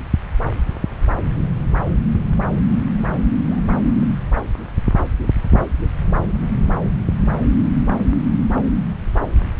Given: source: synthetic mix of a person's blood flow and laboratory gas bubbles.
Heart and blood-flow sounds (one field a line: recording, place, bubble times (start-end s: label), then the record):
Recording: Doppler ultrasound of blood flow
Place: subclavian vein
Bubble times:
3.48-3.59 s: bubbles
3.82-4.06 s: bubbles
From the record:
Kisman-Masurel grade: 111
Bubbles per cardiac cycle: 1 to 2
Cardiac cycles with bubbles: 1 to 10%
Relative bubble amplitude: barely perceptible (0.100 to 0.250)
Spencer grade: 1 (occasional bubble signal discernible with the cardiac motion signal, with majority of cardiac periods free of bubbles)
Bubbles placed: anywhere in the cardiac cycle